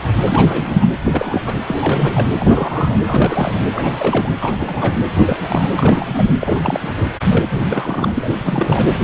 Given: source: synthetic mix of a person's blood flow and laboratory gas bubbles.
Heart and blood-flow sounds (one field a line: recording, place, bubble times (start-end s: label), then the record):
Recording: Doppler ultrasound of blood flow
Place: precordium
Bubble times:
0.26-0.87 s: bubbles
1.05-1.58 s: bubbles
1.67-2.27 s: bubbles
2.36-3.00 s: bubbles
3.04-3.63 s: bubbles
3.72-4.32 s: bubbles
4.39-5.01 s: bubbles
5.12-5.69 s: bubbles
5.76-6.33 s: bubbles
6.39-7.02 s: bubbles
7.28-7.60 s: bubbles
7.67-8.34 s: bubbles
8.41-8.85 s: bubbles
From the record:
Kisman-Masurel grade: 332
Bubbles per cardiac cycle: rolling drumbeat, 9 or more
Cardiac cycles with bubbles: 50 to 99%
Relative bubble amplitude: moderate (0.250 to 0.450)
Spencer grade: 3 (all of the cardiac periods contain showers or single bubble signals, but not dominating or overriding the cardiac motion signals)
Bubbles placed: anywhere in the cardiac cycle